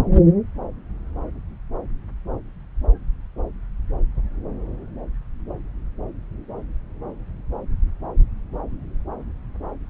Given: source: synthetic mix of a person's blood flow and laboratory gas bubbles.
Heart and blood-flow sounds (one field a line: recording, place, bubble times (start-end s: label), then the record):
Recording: Doppler ultrasound of blood flow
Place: subclavian vein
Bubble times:
no bubbles
From the record:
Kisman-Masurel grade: 000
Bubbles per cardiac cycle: 0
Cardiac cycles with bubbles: 0%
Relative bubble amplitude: no bubbles discernible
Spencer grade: 0 (complete lack of bubble signals)